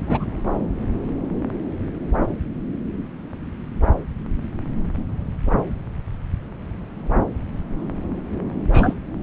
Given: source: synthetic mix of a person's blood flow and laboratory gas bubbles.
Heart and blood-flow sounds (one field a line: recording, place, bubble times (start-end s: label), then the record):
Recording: Doppler ultrasound of blood flow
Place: subclavian vein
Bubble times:
0.07-0.24 s: bubbles
8.72-8.94 s: bubbles
From the record:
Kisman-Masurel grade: 123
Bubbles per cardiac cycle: 1 to 2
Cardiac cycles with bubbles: 10 to 50%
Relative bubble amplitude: loud (0.450 to 0.775)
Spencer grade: 2 (many but less than half of the cardiac periods contain bubble signals, singularly or in groups)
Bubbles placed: anywhere in the cardiac cycle